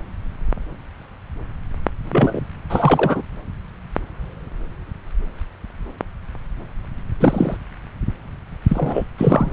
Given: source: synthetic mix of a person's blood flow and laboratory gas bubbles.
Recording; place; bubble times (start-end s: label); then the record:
Doppler ultrasound of blood flow; subclavian vein
2.12-2.41 s: bubbles
2.69-3.23 s: bubbles
7.20-7.57 s: bubbles
8.68-9.06 s: bubbles
9.18-9.53 s: bubbles
From the record:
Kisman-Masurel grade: 223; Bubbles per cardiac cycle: several, 3 to 8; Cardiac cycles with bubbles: 10 to 50%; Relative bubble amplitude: loud (0.450 to 0.775); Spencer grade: 2 (many but less than half of the cardiac periods contain bubble signals, singularly or in groups); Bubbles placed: anywhere in the cardiac cycle